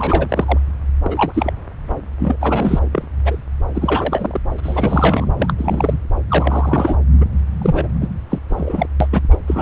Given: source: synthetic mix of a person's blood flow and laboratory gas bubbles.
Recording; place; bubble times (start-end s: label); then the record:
Doppler ultrasound of blood flow; subclavian vein
0.00-0.58 s: bubbles
1.04-1.53 s: bubbles
2.19-2.36 s: bubbles
2.40-2.79 s: bubbles
2.92-3.07 s: bubbles
3.24-3.40 s: bubbles
3.74-4.41 s: bubbles
4.58-5.32 s: bubbles
5.38-5.54 s: bubbles
5.58-5.98 s: bubbles
6.28-6.96 s: bubbles
7.21-7.25 s: bubbles
7.62-7.88 s: bubbles
8.01-8.08 s: bubbles
8.29-8.38 s: bubbles
8.49-8.86 s: bubbles
9.00-9.08 s: bubbles
9.12-9.21 s: bubbles
9.30-9.38 s: bubbles
9.46-9.61 s: bubbles
From the record:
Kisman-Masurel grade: 333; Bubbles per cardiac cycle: rolling drumbeat, 9 or more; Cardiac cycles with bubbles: 50 to 99%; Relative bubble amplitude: loud (0.450 to 0.775); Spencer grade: 3 (all of the cardiac periods contain showers or single bubble signals, but not dominating or overriding the cardiac motion signals); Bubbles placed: anywhere in the cardiac cycle